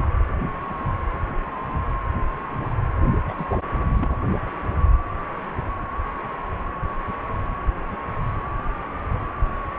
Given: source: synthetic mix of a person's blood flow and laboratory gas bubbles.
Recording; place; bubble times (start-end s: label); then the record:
Doppler ultrasound of blood flow; precordium
3.27-3.34 s: bubbles
3.38-3.46 s: bubbles
3.50-3.58 s: bubbles
3.94-4.17 s: bubbles
From the record:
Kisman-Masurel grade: 211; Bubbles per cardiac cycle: several, 3 to 8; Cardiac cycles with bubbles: 1 to 10%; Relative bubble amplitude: barely perceptible (0.100 to 0.250); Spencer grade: 1 (occasional bubble signal discernible with the cardiac motion signal, with majority of cardiac periods free of bubbles); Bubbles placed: anywhere in the cardiac cycle